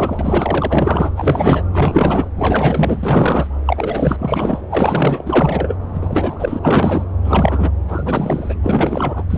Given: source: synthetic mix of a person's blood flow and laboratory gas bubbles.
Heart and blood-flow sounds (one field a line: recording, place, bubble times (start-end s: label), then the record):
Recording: Doppler ultrasound of blood flow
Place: subclavian vein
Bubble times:
0.00-1.11 s: bubbles
1.17-1.62 s: bubbles
1.72-2.27 s: bubbles
2.35-3.47 s: bubbles
3.66-4.61 s: bubbles
4.70-5.23 s: bubbles
5.25-5.75 s: bubbles
5.94-6.59 s: bubbles
6.62-7.04 s: bubbles
7.21-7.71 s: bubbles
7.88-8.55 s: bubbles
8.62-9.23 s: bubbles
9.30-9.38 s: bubbles
From the record:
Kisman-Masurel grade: 444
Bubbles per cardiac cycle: continuous sound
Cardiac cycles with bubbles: 100%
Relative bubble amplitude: maximal (0.775 to 0.999)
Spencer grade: 4 (maximum detectable bubble signal sounding continuously throughout systole and diastole of every cardiac period, and overriding the amplitude of the normal cardiac signals)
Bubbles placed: anywhere in the cardiac cycle